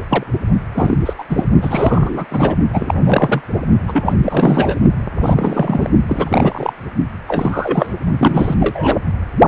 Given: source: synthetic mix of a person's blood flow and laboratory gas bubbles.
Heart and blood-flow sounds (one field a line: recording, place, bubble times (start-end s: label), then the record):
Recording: Doppler ultrasound of blood flow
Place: precordium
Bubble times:
0.09-0.23 s: bubbles
0.75-0.98 s: bubbles
1.05-1.13 s: bubbles
1.18-1.23 s: bubbles
1.29-1.46 s: bubbles
1.62-2.25 s: bubbles
2.30-2.55 s: bubbles
2.73-2.94 s: bubbles
3.03-3.42 s: bubbles
3.88-4.75 s: bubbles
5.21-5.90 s: bubbles
6.07-6.72 s: bubbles
7.28-7.94 s: bubbles
8.19-8.55 s: bubbles
8.59-8.98 s: bubbles
From the record:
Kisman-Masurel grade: 343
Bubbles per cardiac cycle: rolling drumbeat, 9 or more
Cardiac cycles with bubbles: 100%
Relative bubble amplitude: loud (0.450 to 0.775)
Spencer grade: 3 (all of the cardiac periods contain showers or single bubble signals, but not dominating or overriding the cardiac motion signals)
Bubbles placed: only in the low amplitude regions of the cardiac cycle